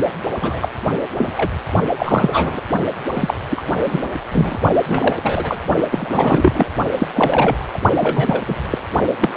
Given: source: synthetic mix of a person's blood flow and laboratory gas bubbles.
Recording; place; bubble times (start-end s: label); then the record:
Doppler ultrasound of blood flow; precordium
0.00-0.04 s: bubbles
0.41-0.68 s: bubbles
1.16-1.31 s: bubbles
1.37-1.51 s: bubbles
1.97-2.61 s: bubbles
3.14-3.35 s: bubbles
3.50-3.64 s: bubbles
3.85-4.11 s: bubbles
4.31-4.59 s: bubbles
4.87-5.16 s: bubbles
5.22-5.57 s: bubbles
5.92-6.66 s: bubbles
6.98-7.08 s: bubbles
7.15-7.78 s: bubbles
7.99-8.41 s: bubbles
8.47-8.55 s: bubbles
8.70-8.78 s: bubbles
9.21-9.37 s: bubbles
From the record:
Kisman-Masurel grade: 243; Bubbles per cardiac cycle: several, 3 to 8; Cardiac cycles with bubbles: 100%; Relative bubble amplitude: loud (0.450 to 0.775); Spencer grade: 3 (all of the cardiac periods contain showers or single bubble signals, but not dominating or overriding the cardiac motion signals); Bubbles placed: only in the low amplitude regions of the cardiac cycle